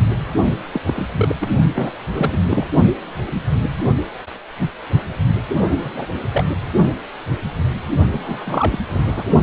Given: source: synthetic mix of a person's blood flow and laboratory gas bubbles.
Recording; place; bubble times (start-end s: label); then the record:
Doppler ultrasound of blood flow; precordium
0.73-0.81 s: bubbles
0.86-1.06 s: bubbles
1.15-1.35 s: bubbles
1.40-1.50 s: bubbles
1.74-1.92 s: bubbles
2.11-2.38 s: bubbles
2.49-2.67 s: bubbles
5.70-6.06 s: bubbles
6.30-6.50 s: bubbles
8.11-8.78 s: bubbles
8.88-9.24 s: bubbles
From the record:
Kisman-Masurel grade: 222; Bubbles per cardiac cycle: several, 3 to 8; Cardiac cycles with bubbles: 10 to 50%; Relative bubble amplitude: moderate (0.250 to 0.450); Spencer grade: 2 (many but less than half of the cardiac periods contain bubble signals, singularly or in groups); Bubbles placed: only in the low amplitude regions of the cardiac cycle